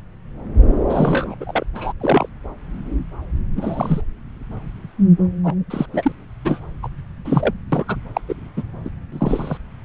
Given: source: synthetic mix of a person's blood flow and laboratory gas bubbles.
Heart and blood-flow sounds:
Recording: Doppler ultrasound of blood flow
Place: subclavian vein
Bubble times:
0.90-1.35 s: bubbles
1.40-1.65 s: bubbles
1.74-1.93 s: bubbles
2.00-2.29 s: bubbles
3.56-4.01 s: bubbles
5.44-5.54 s: bubbles
5.70-5.86 s: bubbles
5.92-6.12 s: bubbles
6.45-6.60 s: bubbles
6.83-6.88 s: bubbles
7.25-7.54 s: bubbles
7.72-7.85 s: bubbles
7.88-7.96 s: bubbles
8.14-8.21 s: bubbles
8.29-8.34 s: bubbles
8.56-8.63 s: bubbles
8.85-8.89 s: bubbles
9.12-9.58 s: bubbles
From the record:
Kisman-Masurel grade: 233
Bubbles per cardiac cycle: several, 3 to 8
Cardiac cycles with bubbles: 50 to 99%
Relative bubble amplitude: loud (0.450 to 0.775)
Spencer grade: 3 (all of the cardiac periods contain showers or single bubble signals, but not dominating or overriding the cardiac motion signals)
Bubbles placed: anywhere in the cardiac cycle

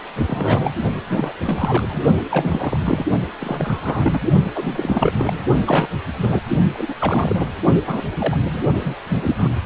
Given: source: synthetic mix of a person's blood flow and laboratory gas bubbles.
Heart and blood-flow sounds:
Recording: Doppler ultrasound of blood flow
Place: precordium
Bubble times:
0.17-0.74 s: bubbles
1.07-1.33 s: bubbles
1.43-2.01 s: bubbles
2.30-3.05 s: bubbles
3.41-4.20 s: bubbles
4.54-5.12 s: bubbles
5.16-5.42 s: bubbles
5.66-5.87 s: bubbles
6.20-6.39 s: bubbles
6.73-6.95 s: bubbles
6.99-7.46 s: bubbles
7.87-8.02 s: bubbles
8.19-8.40 s: bubbles
8.53-8.61 s: bubbles
8.73-8.94 s: bubbles
9.09-9.36 s: bubbles
9.38-9.49 s: bubbles
From the record:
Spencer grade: 3 (all of the cardiac periods contain showers or single bubble signals, but not dominating or overriding the cardiac motion signals)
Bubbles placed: only in the low amplitude regions of the cardiac cycle

